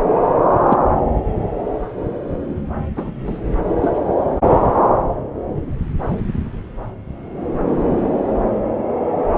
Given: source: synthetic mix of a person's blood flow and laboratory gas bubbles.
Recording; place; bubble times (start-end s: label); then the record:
Doppler ultrasound of blood flow; subclavian vein
0.66-0.77 s: bubbles
2.96-3.11 s: bubbles
3.25-3.39 s: bubbles
3.78-4.00 s: bubbles
From the record:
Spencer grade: 2 (many but less than half of the cardiac periods contain bubble signals, singularly or in groups); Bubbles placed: anywhere in the cardiac cycle